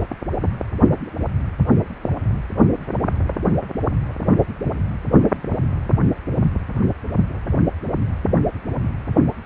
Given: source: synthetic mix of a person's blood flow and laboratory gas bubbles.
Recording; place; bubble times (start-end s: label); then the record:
Doppler ultrasound of blood flow; precordium
no bubbles
From the record:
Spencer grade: 0 (complete lack of bubble signals)